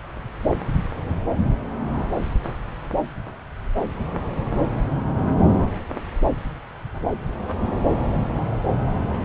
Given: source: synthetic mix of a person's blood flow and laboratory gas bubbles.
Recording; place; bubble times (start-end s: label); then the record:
Doppler ultrasound of blood flow; subclavian vein
no bubbles
From the record:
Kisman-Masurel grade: 000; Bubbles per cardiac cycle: 0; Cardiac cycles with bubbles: 0%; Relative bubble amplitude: no bubbles discernible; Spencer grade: 0 (complete lack of bubble signals)